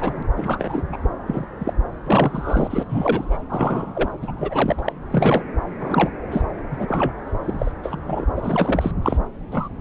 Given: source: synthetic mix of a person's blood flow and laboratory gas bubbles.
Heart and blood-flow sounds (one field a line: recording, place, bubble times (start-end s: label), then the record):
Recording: Doppler ultrasound of blood flow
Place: subclavian vein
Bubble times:
0.00-0.23 s: bubbles
0.37-0.82 s: bubbles
0.92-0.98 s: bubbles
1.27-1.45 s: bubbles
1.58-1.73 s: bubbles
2.05-2.85 s: bubbles
2.89-3.41 s: bubbles
3.49-4.08 s: bubbles
4.21-4.82 s: bubbles
4.84-4.93 s: bubbles
5.11-5.42 s: bubbles
5.79-6.09 s: bubbles
6.31-6.45 s: bubbles
6.71-7.13 s: bubbles
7.27-7.71 s: bubbles
7.83-8.25 s: bubbles
8.35-8.91 s: bubbles
9.02-9.17 s: bubbles
9.51-9.68 s: bubbles
From the record:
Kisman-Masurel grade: 242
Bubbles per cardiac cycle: several, 3 to 8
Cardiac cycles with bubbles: 100%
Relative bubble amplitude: moderate (0.250 to 0.450)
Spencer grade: 3 (all of the cardiac periods contain showers or single bubble signals, but not dominating or overriding the cardiac motion signals)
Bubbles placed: anywhere in the cardiac cycle